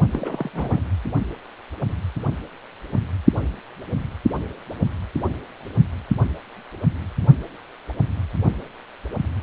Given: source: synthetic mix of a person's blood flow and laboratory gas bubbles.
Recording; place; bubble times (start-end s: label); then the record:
Doppler ultrasound of blood flow; precordium
0.12-0.50 s: bubbles
0.53-0.82 s: bubbles
From the record:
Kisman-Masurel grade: 211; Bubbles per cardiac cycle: several, 3 to 8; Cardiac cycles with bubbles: 1 to 10%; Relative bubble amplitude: barely perceptible (0.100 to 0.250); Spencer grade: 1 (occasional bubble signal discernible with the cardiac motion signal, with majority of cardiac periods free of bubbles); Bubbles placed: only in the low amplitude regions of the cardiac cycle